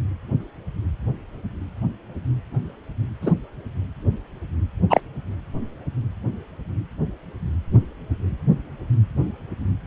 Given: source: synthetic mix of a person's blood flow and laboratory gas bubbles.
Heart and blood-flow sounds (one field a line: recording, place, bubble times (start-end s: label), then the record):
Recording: Doppler ultrasound of blood flow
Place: precordium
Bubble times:
3.22-3.34 s: bubbles
4.90-5.00 s: bubbles
From the record:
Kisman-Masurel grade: 123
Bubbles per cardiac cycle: 1 to 2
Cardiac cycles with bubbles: 10 to 50%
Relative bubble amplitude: loud (0.450 to 0.775)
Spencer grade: 2 (many but less than half of the cardiac periods contain bubble signals, singularly or in groups)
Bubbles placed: anywhere in the cardiac cycle